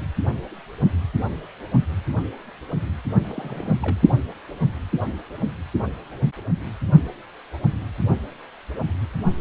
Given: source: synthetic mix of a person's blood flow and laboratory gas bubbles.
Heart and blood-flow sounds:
Doppler ultrasound of blood flow; precordium
3.23-3.98 s: bubbles
From the record:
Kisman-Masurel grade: 221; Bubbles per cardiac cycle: several, 3 to 8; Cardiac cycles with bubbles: 10 to 50%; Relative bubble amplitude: barely perceptible (0.100 to 0.250); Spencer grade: 2 (many but less than half of the cardiac periods contain bubble signals, singularly or in groups); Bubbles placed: only in the low amplitude regions of the cardiac cycle

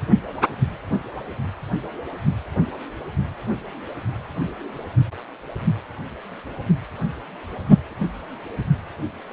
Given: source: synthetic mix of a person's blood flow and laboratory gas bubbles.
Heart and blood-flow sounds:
Doppler ultrasound of blood flow; precordium
no bubbles
From the record:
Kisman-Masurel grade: 000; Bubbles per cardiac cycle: 0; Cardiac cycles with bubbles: 0%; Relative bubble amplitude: no bubbles discernible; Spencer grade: 0 (complete lack of bubble signals)

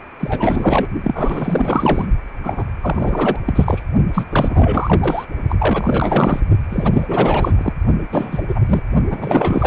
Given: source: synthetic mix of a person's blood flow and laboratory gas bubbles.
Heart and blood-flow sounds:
Doppler ultrasound of blood flow; precordium
0.20-0.87 s: bubbles
1.03-2.07 s: bubbles
2.43-2.64 s: bubbles
2.81-3.39 s: bubbles
3.45-3.83 s: bubbles
4.13-4.25 s: bubbles
4.29-5.25 s: bubbles
5.49-6.40 s: bubbles
6.70-7.52 s: bubbles
7.58-7.73 s: bubbles
8.12-8.42 s: bubbles
8.48-8.61 s: bubbles
8.68-8.83 s: bubbles
9.09-9.67 s: bubbles
From the record:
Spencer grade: 4 (maximum detectable bubble signal sounding continuously throughout systole and diastole of every cardiac period, and overriding the amplitude of the normal cardiac signals); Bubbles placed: only in the low amplitude regions of the cardiac cycle

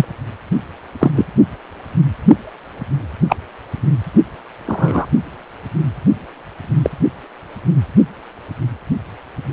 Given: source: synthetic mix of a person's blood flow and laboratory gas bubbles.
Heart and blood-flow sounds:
Doppler ultrasound of blood flow; precordium
0.00-0.06 s: bubbles
0.99-1.11 s: bubbles
1.15-1.25 s: bubbles
3.29-3.36 s: bubbles
4.66-5.06 s: bubbles
6.82-6.90 s: bubbles
From the record:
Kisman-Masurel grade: 123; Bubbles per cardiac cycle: 1 to 2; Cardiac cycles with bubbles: 10 to 50%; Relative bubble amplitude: loud (0.450 to 0.775); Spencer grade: 2 (many but less than half of the cardiac periods contain bubble signals, singularly or in groups); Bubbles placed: only in the low amplitude regions of the cardiac cycle

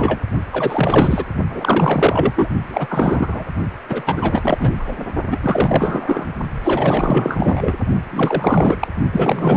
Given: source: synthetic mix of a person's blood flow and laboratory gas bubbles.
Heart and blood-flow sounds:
Doppler ultrasound of blood flow; precordium
0.00-0.18 s: bubbles
0.52-1.25 s: bubbles
1.50-2.50 s: bubbles
2.69-3.45 s: bubbles
3.89-4.75 s: bubbles
4.79-5.08 s: bubbles
5.30-5.39 s: bubbles
5.42-6.26 s: bubbles
6.63-7.74 s: bubbles
8.12-8.88 s: bubbles
9.12-9.57 s: bubbles
From the record:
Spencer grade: 4 (maximum detectable bubble signal sounding continuously throughout systole and diastole of every cardiac period, and overriding the amplitude of the normal cardiac signals); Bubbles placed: only in the low amplitude regions of the cardiac cycle

